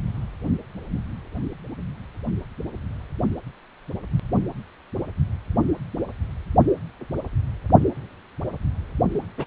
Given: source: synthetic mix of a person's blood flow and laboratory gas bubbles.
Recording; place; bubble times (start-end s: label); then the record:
Doppler ultrasound of blood flow; precordium
9.14-9.27 s: bubbles
9.38-9.45 s: bubbles
From the record:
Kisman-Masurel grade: 211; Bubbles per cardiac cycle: several, 3 to 8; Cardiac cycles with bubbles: 1 to 10%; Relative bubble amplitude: barely perceptible (0.100 to 0.250); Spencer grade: 1 (occasional bubble signal discernible with the cardiac motion signal, with majority of cardiac periods free of bubbles); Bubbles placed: only in the low amplitude regions of the cardiac cycle